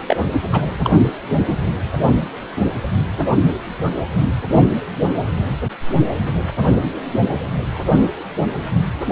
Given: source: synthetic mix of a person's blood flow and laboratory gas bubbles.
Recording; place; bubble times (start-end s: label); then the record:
Doppler ultrasound of blood flow; precordium
0.08-0.16 s: bubbles
0.52-0.61 s: bubbles
0.83-1.00 s: bubbles
1.43-1.71 s: bubbles
From the record:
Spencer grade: 2 (many but less than half of the cardiac periods contain bubble signals, singularly or in groups); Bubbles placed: anywhere in the cardiac cycle